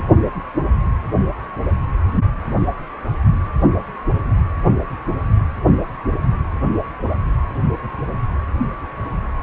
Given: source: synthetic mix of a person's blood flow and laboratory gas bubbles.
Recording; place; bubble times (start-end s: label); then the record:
Doppler ultrasound of blood flow; precordium
0.00-0.04 s: bubbles
From the record:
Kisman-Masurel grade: 211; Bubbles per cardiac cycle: several, 3 to 8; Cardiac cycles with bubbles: 1 to 10%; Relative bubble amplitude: barely perceptible (0.100 to 0.250); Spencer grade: 1 (occasional bubble signal discernible with the cardiac motion signal, with majority of cardiac periods free of bubbles); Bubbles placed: anywhere in the cardiac cycle